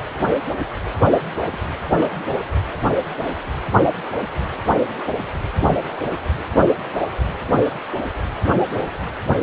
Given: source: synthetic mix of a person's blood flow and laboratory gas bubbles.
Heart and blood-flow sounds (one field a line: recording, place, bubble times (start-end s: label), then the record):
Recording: Doppler ultrasound of blood flow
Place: precordium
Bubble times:
1.44-1.59 s: bubbles
1.97-2.16 s: bubbles
2.28-2.43 s: bubbles
From the record:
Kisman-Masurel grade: 211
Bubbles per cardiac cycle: several, 3 to 8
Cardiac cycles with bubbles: 1 to 10%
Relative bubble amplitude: barely perceptible (0.100 to 0.250)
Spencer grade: 1 (occasional bubble signal discernible with the cardiac motion signal, with majority of cardiac periods free of bubbles)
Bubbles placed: anywhere in the cardiac cycle